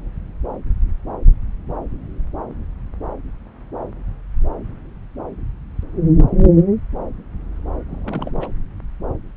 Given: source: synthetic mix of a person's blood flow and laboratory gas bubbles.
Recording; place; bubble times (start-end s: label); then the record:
Doppler ultrasound of blood flow; subclavian vein
7.88-8.48 s: bubbles
From the record:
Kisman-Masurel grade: 211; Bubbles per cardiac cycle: several, 3 to 8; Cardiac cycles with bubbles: 1 to 10%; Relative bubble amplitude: barely perceptible (0.100 to 0.250); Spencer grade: 1 (occasional bubble signal discernible with the cardiac motion signal, with majority of cardiac periods free of bubbles); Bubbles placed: anywhere in the cardiac cycle